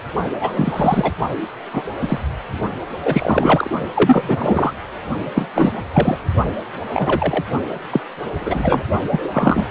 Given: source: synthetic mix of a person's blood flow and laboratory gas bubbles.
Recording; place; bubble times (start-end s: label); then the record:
Doppler ultrasound of blood flow; precordium
0.40-1.13 s: bubbles
1.73-1.83 s: bubbles
2.01-2.19 s: bubbles
3.04-3.71 s: bubbles
3.95-4.73 s: bubbles
5.34-5.47 s: bubbles
5.54-5.71 s: bubbles
5.92-6.18 s: bubbles
6.93-7.45 s: bubbles
7.91-8.01 s: bubbles
8.34-8.83 s: bubbles
9.12-9.20 s: bubbles
9.24-9.29 s: bubbles
9.32-9.65 s: bubbles
From the record:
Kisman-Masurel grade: 243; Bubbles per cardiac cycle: several, 3 to 8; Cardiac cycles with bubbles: 100%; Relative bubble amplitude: loud (0.450 to 0.775); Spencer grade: 3 (all of the cardiac periods contain showers or single bubble signals, but not dominating or overriding the cardiac motion signals); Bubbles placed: only in the low amplitude regions of the cardiac cycle